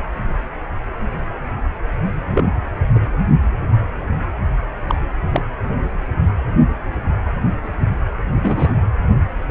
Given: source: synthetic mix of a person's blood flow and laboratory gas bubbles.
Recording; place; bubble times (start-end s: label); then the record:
Doppler ultrasound of blood flow; precordium
2.31-2.45 s: bubbles
2.95-3.00 s: bubbles
4.88-4.95 s: bubbles
5.32-5.42 s: bubbles
8.42-8.75 s: bubbles
From the record:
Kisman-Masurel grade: 123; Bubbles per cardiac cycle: 1 to 2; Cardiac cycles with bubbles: 10 to 50%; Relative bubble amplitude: loud (0.450 to 0.775); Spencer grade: 2 (many but less than half of the cardiac periods contain bubble signals, singularly or in groups); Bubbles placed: anywhere in the cardiac cycle